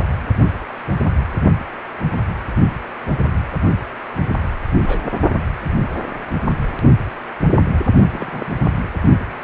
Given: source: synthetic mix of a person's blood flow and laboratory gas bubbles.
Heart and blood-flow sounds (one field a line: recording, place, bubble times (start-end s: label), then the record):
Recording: Doppler ultrasound of blood flow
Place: precordium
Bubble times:
4.82-5.01 s: bubbles
8.10-8.57 s: bubbles
From the record:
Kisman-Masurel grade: 121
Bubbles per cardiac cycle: 1 to 2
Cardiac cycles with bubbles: 10 to 50%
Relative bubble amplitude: barely perceptible (0.100 to 0.250)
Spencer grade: 2 (many but less than half of the cardiac periods contain bubble signals, singularly or in groups)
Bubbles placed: only in the low amplitude regions of the cardiac cycle